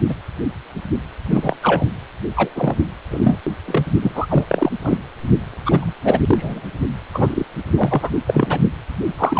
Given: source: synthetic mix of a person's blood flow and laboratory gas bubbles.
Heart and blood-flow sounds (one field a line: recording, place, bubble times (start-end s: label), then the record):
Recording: Doppler ultrasound of blood flow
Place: precordium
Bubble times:
0.08-0.14 s: bubbles
1.30-1.57 s: bubbles
1.62-1.86 s: bubbles
2.36-2.50 s: bubbles
2.55-2.75 s: bubbles
3.10-3.38 s: bubbles
3.68-3.84 s: bubbles
4.01-4.12 s: bubbles
4.15-4.26 s: bubbles
4.29-4.44 s: bubbles
4.49-4.70 s: bubbles
4.83-4.97 s: bubbles
5.65-5.94 s: bubbles
6.04-6.20 s: bubbles
6.26-6.61 s: bubbles
7.13-7.45 s: bubbles
7.75-8.10 s: bubbles
8.27-8.59 s: bubbles
9.17-9.40 s: bubbles
From the record:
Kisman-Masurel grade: 233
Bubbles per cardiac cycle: several, 3 to 8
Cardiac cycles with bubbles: 50 to 99%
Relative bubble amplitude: loud (0.450 to 0.775)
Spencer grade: 3 (all of the cardiac periods contain showers or single bubble signals, but not dominating or overriding the cardiac motion signals)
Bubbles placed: anywhere in the cardiac cycle